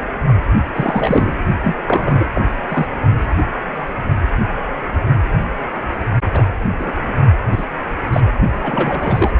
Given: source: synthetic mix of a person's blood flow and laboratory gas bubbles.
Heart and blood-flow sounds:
Doppler ultrasound of blood flow; precordium
0.73-1.36 s: bubbles
1.64-1.74 s: bubbles
1.87-2.29 s: bubbles
2.35-2.45 s: bubbles
2.69-2.87 s: bubbles
6.33-6.42 s: bubbles
6.78-6.92 s: bubbles
7.52-7.65 s: bubbles
8.12-8.21 s: bubbles
8.60-9.32 s: bubbles
From the record:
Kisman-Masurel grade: 232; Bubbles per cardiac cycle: several, 3 to 8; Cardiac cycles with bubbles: 50 to 99%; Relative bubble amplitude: moderate (0.250 to 0.450); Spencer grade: 3 (all of the cardiac periods contain showers or single bubble signals, but not dominating or overriding the cardiac motion signals); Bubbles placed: only in the low amplitude regions of the cardiac cycle

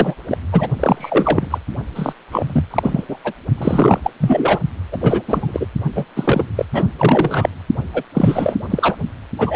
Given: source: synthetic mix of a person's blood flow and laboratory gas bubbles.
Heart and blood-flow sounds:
Doppler ultrasound of blood flow; precordium
0.00-0.15 s: bubbles
0.28-0.38 s: bubbles
0.52-0.68 s: bubbles
0.76-1.58 s: bubbles
1.95-2.12 s: bubbles
2.31-2.65 s: bubbles
2.70-3.03 s: bubbles
3.08-3.17 s: bubbles
3.23-3.32 s: bubbles
3.57-4.00 s: bubbles
4.02-4.10 s: bubbles
4.20-4.59 s: bubbles
4.92-4.97 s: bubbles
5.00-5.21 s: bubbles
5.26-5.67 s: bubbles
5.95-6.05 s: bubbles
6.16-6.44 s: bubbles
6.56-6.65 s: bubbles
6.72-6.84 s: bubbles
6.97-7.50 s: bubbles
7.93-8.04 s: bubbles
8.15-8.57 s: bubbles
8.70-8.97 s: bubbles
9.38-9.56 s: bubbles
From the record:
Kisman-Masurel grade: 343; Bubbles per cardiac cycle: rolling drumbeat, 9 or more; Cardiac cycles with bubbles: 100%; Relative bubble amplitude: loud (0.450 to 0.775); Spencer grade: 3 (all of the cardiac periods contain showers or single bubble signals, but not dominating or overriding the cardiac motion signals); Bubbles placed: only in the low amplitude regions of the cardiac cycle

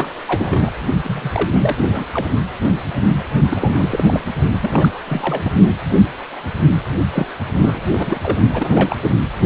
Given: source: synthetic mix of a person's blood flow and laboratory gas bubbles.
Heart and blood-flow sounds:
Doppler ultrasound of blood flow; precordium
0.00-0.10 s: bubbles
0.27-0.72 s: bubbles
1.03-2.06 s: bubbles
2.12-2.26 s: bubbles
3.50-4.20 s: bubbles
4.62-5.00 s: bubbles
5.06-5.52 s: bubbles
7.12-7.25 s: bubbles
7.59-7.80 s: bubbles
7.92-8.20 s: bubbles
8.22-8.38 s: bubbles
8.53-8.97 s: bubbles
9.02-9.17 s: bubbles
From the record:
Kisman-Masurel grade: 332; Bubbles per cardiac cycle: rolling drumbeat, 9 or more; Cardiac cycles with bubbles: 50 to 99%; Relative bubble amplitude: moderate (0.250 to 0.450); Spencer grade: 3 (all of the cardiac periods contain showers or single bubble signals, but not dominating or overriding the cardiac motion signals); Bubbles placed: only in the low amplitude regions of the cardiac cycle

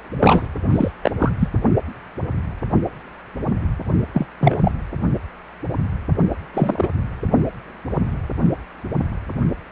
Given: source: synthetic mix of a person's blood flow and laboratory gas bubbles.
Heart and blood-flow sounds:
Doppler ultrasound of blood flow; precordium
0.19-0.48 s: bubbles
0.70-0.91 s: bubbles
1.03-1.11 s: bubbles
1.19-1.30 s: bubbles
1.39-1.48 s: bubbles
4.13-4.26 s: bubbles
4.40-4.71 s: bubbles
6.54-6.88 s: bubbles
From the record:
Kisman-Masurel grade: 232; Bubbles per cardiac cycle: several, 3 to 8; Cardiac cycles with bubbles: 50 to 99%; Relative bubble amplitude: moderate (0.250 to 0.450); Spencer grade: 3 (all of the cardiac periods contain showers or single bubble signals, but not dominating or overriding the cardiac motion signals); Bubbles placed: only in the low amplitude regions of the cardiac cycle

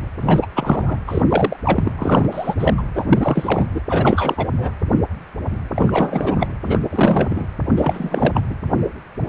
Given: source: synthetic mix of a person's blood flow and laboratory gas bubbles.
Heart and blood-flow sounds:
Doppler ultrasound of blood flow; precordium
0.21-0.40 s: bubbles
0.42-0.46 s: bubbles
0.55-0.98 s: bubbles
1.07-1.23 s: bubbles
1.29-1.56 s: bubbles
1.65-1.92 s: bubbles
1.98-2.55 s: bubbles
2.58-2.74 s: bubbles
2.77-2.82 s: bubbles
2.94-3.06 s: bubbles
3.09-3.69 s: bubbles
3.74-3.81 s: bubbles
3.89-4.47 s: bubbles
4.50-4.71 s: bubbles
5.76-6.47 s: bubbles
6.66-6.79 s: bubbles
6.90-7.46 s: bubbles
7.77-8.42 s: bubbles
8.50-8.55 s: bubbles
From the record:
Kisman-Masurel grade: 333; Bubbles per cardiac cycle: rolling drumbeat, 9 or more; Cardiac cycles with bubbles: 50 to 99%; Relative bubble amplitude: loud (0.450 to 0.775); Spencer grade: 3 (all of the cardiac periods contain showers or single bubble signals, but not dominating or overriding the cardiac motion signals); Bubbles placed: anywhere in the cardiac cycle

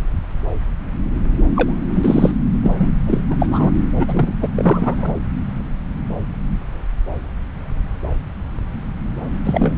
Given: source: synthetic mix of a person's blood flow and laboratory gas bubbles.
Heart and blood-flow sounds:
Doppler ultrasound of blood flow; subclavian vein
1.56-1.75 s: bubbles
1.89-2.31 s: bubbles
2.62-2.75 s: bubbles
2.77-2.94 s: bubbles
3.06-3.21 s: bubbles
3.30-3.35 s: bubbles
3.39-3.46 s: bubbles
3.50-3.71 s: bubbles
3.99-4.33 s: bubbles
4.41-4.48 s: bubbles
4.57-5.12 s: bubbles
9.45-9.75 s: bubbles
From the record:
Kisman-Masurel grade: 223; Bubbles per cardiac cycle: several, 3 to 8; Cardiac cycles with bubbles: 10 to 50%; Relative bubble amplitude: loud (0.450 to 0.775); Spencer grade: 2 (many but less than half of the cardiac periods contain bubble signals, singularly or in groups); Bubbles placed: anywhere in the cardiac cycle

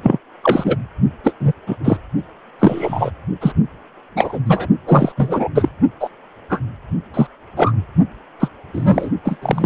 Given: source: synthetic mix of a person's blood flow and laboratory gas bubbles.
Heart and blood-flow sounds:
Doppler ultrasound of blood flow; precordium
0.02-0.18 s: bubbles
0.43-0.77 s: bubbles
1.23-1.34 s: bubbles
1.40-1.52 s: bubbles
1.67-1.77 s: bubbles
1.84-1.97 s: bubbles
2.60-3.11 s: bubbles
3.41-3.52 s: bubbles
4.15-4.39 s: bubbles
4.46-4.67 s: bubbles
4.87-5.12 s: bubbles
5.17-5.49 s: bubbles
5.54-5.69 s: bubbles
6.00-6.09 s: bubbles
6.49-6.59 s: bubbles
7.13-7.27 s: bubbles
7.57-7.73 s: bubbles
8.39-8.48 s: bubbles
8.73-9.10 s: bubbles
9.24-9.38 s: bubbles
9.42-9.66 s: bubbles
From the record:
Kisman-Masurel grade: 233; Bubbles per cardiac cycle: several, 3 to 8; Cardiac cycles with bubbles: 50 to 99%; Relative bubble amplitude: loud (0.450 to 0.775); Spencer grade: 3 (all of the cardiac periods contain showers or single bubble signals, but not dominating or overriding the cardiac motion signals); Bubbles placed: only in the low amplitude regions of the cardiac cycle

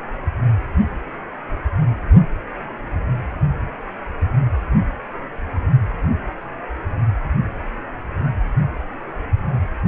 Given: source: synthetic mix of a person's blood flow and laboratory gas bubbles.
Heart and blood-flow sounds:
Doppler ultrasound of blood flow; precordium
no bubbles
From the record:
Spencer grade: 0 (complete lack of bubble signals)

